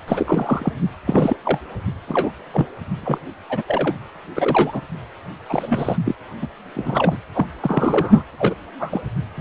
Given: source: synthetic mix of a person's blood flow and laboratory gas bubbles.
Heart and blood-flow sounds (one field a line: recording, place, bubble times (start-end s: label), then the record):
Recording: Doppler ultrasound of blood flow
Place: precordium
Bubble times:
0.08-0.72 s: bubbles
1.06-1.36 s: bubbles
1.45-1.59 s: bubbles
2.07-2.31 s: bubbles
2.52-2.66 s: bubbles
3.03-3.18 s: bubbles
3.49-3.64 s: bubbles
3.68-3.95 s: bubbles
4.36-4.82 s: bubbles
5.49-5.97 s: bubbles
6.05-6.15 s: bubbles
6.42-6.48 s: bubbles
6.74-7.18 s: bubbles
7.33-7.46 s: bubbles
7.62-8.23 s: bubbles
8.38-8.54 s: bubbles
8.79-9.02 s: bubbles
9.37-9.41 s: bubbles
From the record:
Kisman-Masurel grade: 242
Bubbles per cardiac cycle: several, 3 to 8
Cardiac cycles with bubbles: 100%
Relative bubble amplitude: moderate (0.250 to 0.450)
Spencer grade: 3 (all of the cardiac periods contain showers or single bubble signals, but not dominating or overriding the cardiac motion signals)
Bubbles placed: anywhere in the cardiac cycle